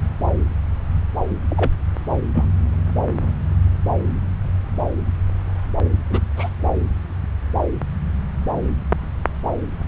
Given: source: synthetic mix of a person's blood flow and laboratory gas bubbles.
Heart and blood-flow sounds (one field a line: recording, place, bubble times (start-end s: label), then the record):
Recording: Doppler ultrasound of blood flow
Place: subclavian vein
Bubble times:
1.49-1.70 s: bubbles
2.34-2.48 s: bubbles
6.10-6.20 s: bubbles
6.36-6.50 s: bubbles
From the record:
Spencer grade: 2 (many but less than half of the cardiac periods contain bubble signals, singularly or in groups)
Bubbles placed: anywhere in the cardiac cycle